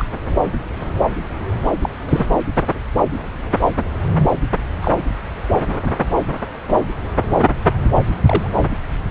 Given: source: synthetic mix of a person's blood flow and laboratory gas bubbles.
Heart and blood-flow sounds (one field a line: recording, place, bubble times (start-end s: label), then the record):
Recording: Doppler ultrasound of blood flow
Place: subclavian vein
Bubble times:
0.00-0.05 s: bubbles
1.81-1.89 s: bubbles
2.08-2.26 s: bubbles
4.81-4.93 s: bubbles
8.25-8.51 s: bubbles
From the record:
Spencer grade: 2 (many but less than half of the cardiac periods contain bubble signals, singularly or in groups)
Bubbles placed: anywhere in the cardiac cycle